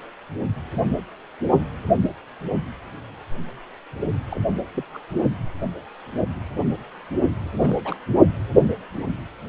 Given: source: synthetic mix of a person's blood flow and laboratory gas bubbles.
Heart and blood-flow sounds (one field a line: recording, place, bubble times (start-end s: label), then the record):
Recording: Doppler ultrasound of blood flow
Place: precordium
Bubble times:
4.30-4.39 s: bubbles
4.74-4.84 s: bubbles
4.93-4.98 s: bubbles
7.61-7.75 s: bubbles
7.84-7.99 s: bubbles
From the record:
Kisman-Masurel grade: 221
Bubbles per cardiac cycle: several, 3 to 8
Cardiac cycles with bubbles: 10 to 50%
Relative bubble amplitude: barely perceptible (0.100 to 0.250)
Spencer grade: 2 (many but less than half of the cardiac periods contain bubble signals, singularly or in groups)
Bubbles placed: only in the low amplitude regions of the cardiac cycle